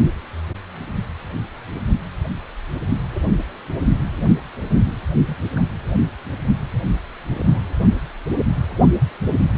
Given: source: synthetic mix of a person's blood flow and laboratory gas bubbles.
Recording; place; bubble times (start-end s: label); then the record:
Doppler ultrasound of blood flow; precordium
3.14-3.22 s: bubbles
5.26-5.36 s: bubbles
5.55-5.59 s: bubbles
7.35-7.60 s: bubbles
From the record:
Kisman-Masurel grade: 121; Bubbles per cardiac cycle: 1 to 2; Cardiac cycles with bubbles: 10 to 50%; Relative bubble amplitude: barely perceptible (0.100 to 0.250); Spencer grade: 2 (many but less than half of the cardiac periods contain bubble signals, singularly or in groups); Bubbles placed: anywhere in the cardiac cycle